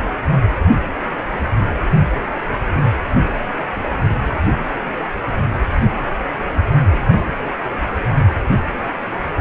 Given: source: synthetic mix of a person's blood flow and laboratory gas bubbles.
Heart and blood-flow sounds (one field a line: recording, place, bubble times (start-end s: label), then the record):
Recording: Doppler ultrasound of blood flow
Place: precordium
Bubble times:
6.89-7.32 s: bubbles
From the record:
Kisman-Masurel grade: 111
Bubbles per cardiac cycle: 1 to 2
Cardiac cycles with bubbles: 1 to 10%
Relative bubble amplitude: barely perceptible (0.100 to 0.250)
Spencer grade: 1 (occasional bubble signal discernible with the cardiac motion signal, with majority of cardiac periods free of bubbles)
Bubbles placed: anywhere in the cardiac cycle